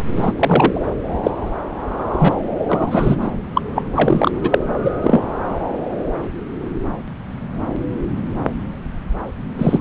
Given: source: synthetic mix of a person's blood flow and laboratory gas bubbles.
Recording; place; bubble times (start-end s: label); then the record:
Doppler ultrasound of blood flow; subclavian vein
0.16-0.86 s: bubbles
1.23-1.31 s: bubbles
2.13-2.33 s: bubbles
2.68-3.15 s: bubbles
3.21-3.31 s: bubbles
3.54-3.61 s: bubbles
3.75-3.83 s: bubbles
3.95-4.31 s: bubbles
4.44-4.59 s: bubbles
4.82-4.91 s: bubbles
5.02-5.24 s: bubbles
9.58-9.79 s: bubbles
From the record:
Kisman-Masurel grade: 233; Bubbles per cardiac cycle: several, 3 to 8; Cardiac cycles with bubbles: 50 to 99%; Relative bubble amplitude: loud (0.450 to 0.775); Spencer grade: 3 (all of the cardiac periods contain showers or single bubble signals, but not dominating or overriding the cardiac motion signals); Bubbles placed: anywhere in the cardiac cycle